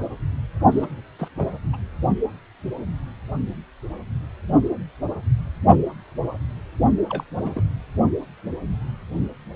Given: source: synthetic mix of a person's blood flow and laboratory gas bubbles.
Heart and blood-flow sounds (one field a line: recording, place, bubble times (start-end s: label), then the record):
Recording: Doppler ultrasound of blood flow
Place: precordium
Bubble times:
0.71-0.91 s: bubbles
1.19-1.28 s: bubbles
1.36-1.52 s: bubbles
1.73-1.76 s: bubbles
7.08-7.24 s: bubbles
7.35-7.63 s: bubbles
From the record:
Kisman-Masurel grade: 221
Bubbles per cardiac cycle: several, 3 to 8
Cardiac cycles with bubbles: 10 to 50%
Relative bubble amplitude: barely perceptible (0.100 to 0.250)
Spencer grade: 2 (many but less than half of the cardiac periods contain bubble signals, singularly or in groups)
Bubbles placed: only in the low amplitude regions of the cardiac cycle